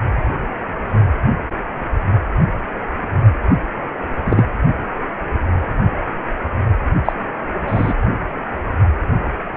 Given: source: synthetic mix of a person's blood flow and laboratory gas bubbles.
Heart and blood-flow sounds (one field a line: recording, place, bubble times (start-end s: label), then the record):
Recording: Doppler ultrasound of blood flow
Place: precordium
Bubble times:
4.25-4.44 s: bubbles
7.05-7.12 s: bubbles
7.67-7.94 s: bubbles
From the record:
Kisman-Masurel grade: 123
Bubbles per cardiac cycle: 1 to 2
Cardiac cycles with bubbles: 10 to 50%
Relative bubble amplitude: loud (0.450 to 0.775)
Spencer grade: 2 (many but less than half of the cardiac periods contain bubble signals, singularly or in groups)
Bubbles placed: only in the low amplitude regions of the cardiac cycle